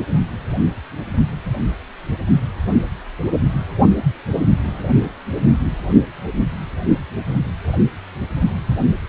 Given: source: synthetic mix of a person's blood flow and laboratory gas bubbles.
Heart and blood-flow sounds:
Doppler ultrasound of blood flow; precordium
no bubbles
From the record:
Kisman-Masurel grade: 000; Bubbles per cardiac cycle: 0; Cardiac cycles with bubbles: 0%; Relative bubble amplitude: no bubbles discernible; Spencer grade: 0 (complete lack of bubble signals)

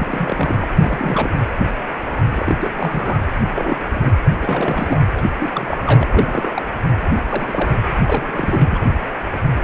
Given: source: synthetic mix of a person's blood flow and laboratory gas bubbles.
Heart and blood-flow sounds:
Doppler ultrasound of blood flow; precordium
0.00-0.57 s: bubbles
0.60-0.68 s: bubbles
0.78-1.39 s: bubbles
2.29-2.56 s: bubbles
2.59-2.71 s: bubbles
2.77-3.28 s: bubbles
3.56-3.78 s: bubbles
3.93-4.12 s: bubbles
4.36-5.00 s: bubbles
5.15-5.28 s: bubbles
5.38-6.62 s: bubbles
7.12-7.22 s: bubbles
7.29-7.83 s: bubbles
8.07-8.85 s: bubbles
From the record:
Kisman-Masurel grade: 342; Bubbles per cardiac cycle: rolling drumbeat, 9 or more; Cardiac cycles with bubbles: 100%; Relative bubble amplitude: moderate (0.250 to 0.450); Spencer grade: 3 (all of the cardiac periods contain showers or single bubble signals, but not dominating or overriding the cardiac motion signals); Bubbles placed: anywhere in the cardiac cycle

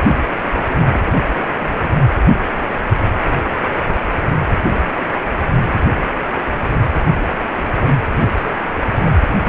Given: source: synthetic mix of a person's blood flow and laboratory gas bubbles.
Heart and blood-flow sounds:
Doppler ultrasound of blood flow; precordium
0.09-0.15 s: bubbles
0.68-1.01 s: bubbles
1.04-1.33 s: bubbles
1.42-1.49 s: bubbles
1.60-1.95 s: bubbles
8.11-8.29 s: bubbles
8.31-8.54 s: bubbles
9.04-9.11 s: bubbles
From the record:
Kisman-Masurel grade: 221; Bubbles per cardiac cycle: several, 3 to 8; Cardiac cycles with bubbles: 10 to 50%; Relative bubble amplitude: barely perceptible (0.100 to 0.250); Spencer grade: 2 (many but less than half of the cardiac periods contain bubble signals, singularly or in groups); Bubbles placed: anywhere in the cardiac cycle

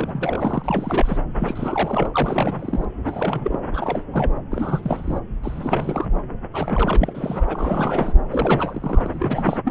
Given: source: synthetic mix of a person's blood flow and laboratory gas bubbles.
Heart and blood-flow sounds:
Doppler ultrasound of blood flow; subclavian vein
0.00-1.18 s: bubbles
1.40-2.11 s: bubbles
2.13-2.85 s: bubbles
3.04-3.60 s: bubbles
3.74-4.04 s: bubbles
4.12-4.32 s: bubbles
4.51-5.18 s: bubbles
5.42-6.06 s: bubbles
6.53-7.44 s: bubbles
7.46-8.13 s: bubbles
8.29-9.61 s: bubbles
9.64-9.71 s: bubbles
From the record:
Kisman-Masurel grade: 342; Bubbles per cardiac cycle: rolling drumbeat, 9 or more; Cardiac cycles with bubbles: 100%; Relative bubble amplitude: moderate (0.250 to 0.450); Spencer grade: 3 (all of the cardiac periods contain showers or single bubble signals, but not dominating or overriding the cardiac motion signals); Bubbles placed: anywhere in the cardiac cycle

